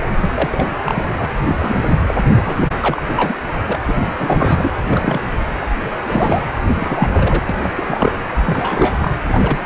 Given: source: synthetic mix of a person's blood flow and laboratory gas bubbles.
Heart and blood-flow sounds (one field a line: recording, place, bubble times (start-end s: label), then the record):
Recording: Doppler ultrasound of blood flow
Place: precordium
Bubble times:
0.22-0.78 s: bubbles
0.83-1.15 s: bubbles
1.19-1.30 s: bubbles
1.45-1.56 s: bubbles
1.60-2.14 s: bubbles
2.33-2.69 s: bubbles
2.82-3.36 s: bubbles
3.67-3.79 s: bubbles
3.85-3.99 s: bubbles
4.19-4.71 s: bubbles
4.93-5.21 s: bubbles
6.04-6.42 s: bubbles
6.79-7.42 s: bubbles
7.49-7.56 s: bubbles
7.63-8.15 s: bubbles
8.35-8.98 s: bubbles
9.02-9.11 s: bubbles
9.27-9.58 s: bubbles
9.64-9.66 s: bubbles
From the record:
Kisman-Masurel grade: 342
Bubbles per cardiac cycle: rolling drumbeat, 9 or more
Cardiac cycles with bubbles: 100%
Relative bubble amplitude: moderate (0.250 to 0.450)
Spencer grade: 3 (all of the cardiac periods contain showers or single bubble signals, but not dominating or overriding the cardiac motion signals)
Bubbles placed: anywhere in the cardiac cycle